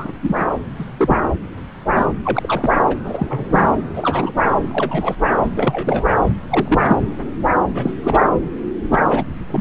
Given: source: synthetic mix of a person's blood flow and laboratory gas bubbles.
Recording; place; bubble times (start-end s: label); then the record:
Doppler ultrasound of blood flow; subclavian vein
0.00-0.12 s: bubbles
0.22-0.51 s: bubbles
0.79-0.84 s: bubbles
0.98-1.30 s: bubbles
1.96-2.07 s: bubbles
2.24-2.73 s: bubbles
2.90-2.94 s: bubbles
3.03-3.69 s: bubbles
3.94-4.33 s: bubbles
4.71-5.15 s: bubbles
5.43-5.49 s: bubbles
5.55-6.17 s: bubbles
6.50-7.00 s: bubbles
7.74-7.91 s: bubbles
8.03-8.26 s: bubbles
8.91-8.99 s: bubbles
9.08-9.24 s: bubbles
9.47-9.61 s: bubbles
From the record:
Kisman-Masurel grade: 232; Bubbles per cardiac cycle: several, 3 to 8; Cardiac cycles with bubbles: 50 to 99%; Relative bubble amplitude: moderate (0.250 to 0.450); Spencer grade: 3 (all of the cardiac periods contain showers or single bubble signals, but not dominating or overriding the cardiac motion signals); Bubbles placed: anywhere in the cardiac cycle